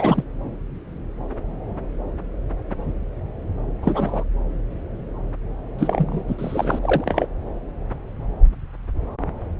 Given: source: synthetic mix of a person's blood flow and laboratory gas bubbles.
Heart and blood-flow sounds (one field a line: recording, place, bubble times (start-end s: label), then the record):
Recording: Doppler ultrasound of blood flow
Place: subclavian vein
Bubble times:
0.00-0.24 s: bubbles
3.82-4.24 s: bubbles
5.78-6.23 s: bubbles
6.27-6.35 s: bubbles
6.38-6.79 s: bubbles
6.81-7.26 s: bubbles
From the record:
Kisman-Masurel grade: 222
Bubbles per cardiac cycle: several, 3 to 8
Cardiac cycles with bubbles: 10 to 50%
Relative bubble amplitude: moderate (0.250 to 0.450)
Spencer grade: 2 (many but less than half of the cardiac periods contain bubble signals, singularly or in groups)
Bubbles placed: anywhere in the cardiac cycle